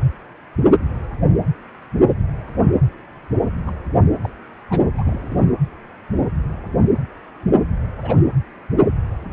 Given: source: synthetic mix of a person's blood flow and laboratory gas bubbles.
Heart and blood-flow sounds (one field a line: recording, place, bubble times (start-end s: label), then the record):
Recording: Doppler ultrasound of blood flow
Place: precordium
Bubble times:
3.67-3.71 s: bubbles
4.23-4.29 s: bubbles
4.70-4.81 s: bubbles
4.97-5.40 s: bubbles
8.02-8.16 s: bubbles
From the record:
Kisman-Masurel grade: 121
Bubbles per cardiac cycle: 1 to 2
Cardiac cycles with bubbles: 10 to 50%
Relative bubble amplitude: barely perceptible (0.100 to 0.250)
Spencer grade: 2 (many but less than half of the cardiac periods contain bubble signals, singularly or in groups)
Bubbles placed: anywhere in the cardiac cycle